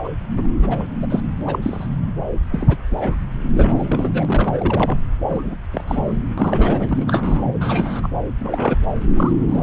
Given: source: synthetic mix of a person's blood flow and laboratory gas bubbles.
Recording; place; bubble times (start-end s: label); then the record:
Doppler ultrasound of blood flow; subclavian vein
0.04-0.08 s: bubbles
0.37-0.49 s: bubbles
0.62-0.83 s: bubbles
1.02-1.06 s: bubbles
1.09-1.21 s: bubbles
1.46-1.59 s: bubbles
1.62-1.87 s: bubbles
2.52-2.76 s: bubbles
2.90-3.15 s: bubbles
3.54-4.96 s: bubbles
5.29-5.56 s: bubbles
5.73-5.84 s: bubbles
5.88-6.20 s: bubbles
6.38-6.86 s: bubbles
6.89-7.43 s: bubbles
7.60-8.08 s: bubbles
8.39-8.78 s: bubbles
9.17-9.32 s: bubbles
9.47-9.63 s: bubbles
From the record:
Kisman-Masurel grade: 242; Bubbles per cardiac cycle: several, 3 to 8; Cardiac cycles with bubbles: 100%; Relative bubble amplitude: moderate (0.250 to 0.450); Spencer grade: 3 (all of the cardiac periods contain showers or single bubble signals, but not dominating or overriding the cardiac motion signals); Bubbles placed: anywhere in the cardiac cycle